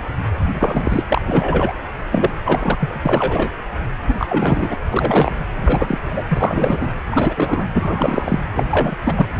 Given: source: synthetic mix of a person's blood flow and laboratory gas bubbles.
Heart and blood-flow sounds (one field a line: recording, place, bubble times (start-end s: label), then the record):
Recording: Doppler ultrasound of blood flow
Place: precordium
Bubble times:
0.51-1.04 s: bubbles
1.10-1.22 s: bubbles
1.27-1.73 s: bubbles
2.11-2.31 s: bubbles
2.44-2.98 s: bubbles
3.05-3.51 s: bubbles
4.07-4.14 s: bubbles
4.18-4.26 s: bubbles
4.28-4.75 s: bubbles
4.92-5.32 s: bubbles
5.56-5.98 s: bubbles
6.05-6.24 s: bubbles
6.29-6.88 s: bubbles
7.10-7.66 s: bubbles
7.74-8.39 s: bubbles
8.54-8.66 s: bubbles
8.71-8.96 s: bubbles
9.03-9.27 s: bubbles
From the record:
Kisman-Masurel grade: 333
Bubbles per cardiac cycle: rolling drumbeat, 9 or more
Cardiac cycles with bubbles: 50 to 99%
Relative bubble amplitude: loud (0.450 to 0.775)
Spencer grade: 3 (all of the cardiac periods contain showers or single bubble signals, but not dominating or overriding the cardiac motion signals)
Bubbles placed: anywhere in the cardiac cycle